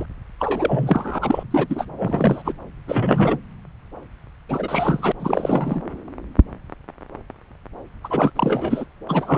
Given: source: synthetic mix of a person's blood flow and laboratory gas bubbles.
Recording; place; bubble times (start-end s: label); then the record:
Doppler ultrasound of blood flow; subclavian vein
0.00-0.06 s: bubbles
0.39-1.44 s: bubbles
1.51-1.67 s: bubbles
1.69-1.85 s: bubbles
1.98-2.54 s: bubbles
2.87-3.40 s: bubbles
4.49-5.12 s: bubbles
5.20-5.83 s: bubbles
8.04-8.30 s: bubbles
8.35-8.85 s: bubbles
9.08-9.38 s: bubbles
From the record:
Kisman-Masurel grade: 332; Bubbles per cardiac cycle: rolling drumbeat, 9 or more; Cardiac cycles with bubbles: 50 to 99%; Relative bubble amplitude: moderate (0.250 to 0.450); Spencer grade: 3 (all of the cardiac periods contain showers or single bubble signals, but not dominating or overriding the cardiac motion signals); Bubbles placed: anywhere in the cardiac cycle